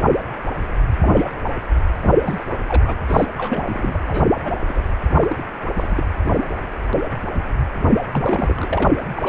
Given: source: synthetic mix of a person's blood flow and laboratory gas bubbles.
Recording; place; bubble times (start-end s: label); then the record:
Doppler ultrasound of blood flow; precordium
0.97-1.25 s: bubbles
1.43-1.50 s: bubbles
2.02-2.17 s: bubbles
2.21-2.44 s: bubbles
2.67-2.84 s: bubbles
2.87-2.97 s: bubbles
3.08-3.25 s: bubbles
3.37-4.00 s: bubbles
4.08-4.25 s: bubbles
4.39-4.55 s: bubbles
4.69-4.82 s: bubbles
5.21-5.42 s: bubbles
5.76-6.04 s: bubbles
8.12-8.66 s: bubbles
8.69-8.91 s: bubbles
9.15-9.29 s: bubbles
From the record:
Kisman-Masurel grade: 232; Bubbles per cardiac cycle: several, 3 to 8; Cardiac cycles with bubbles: 50 to 99%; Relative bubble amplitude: moderate (0.250 to 0.450); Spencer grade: 3 (all of the cardiac periods contain showers or single bubble signals, but not dominating or overriding the cardiac motion signals); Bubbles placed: anywhere in the cardiac cycle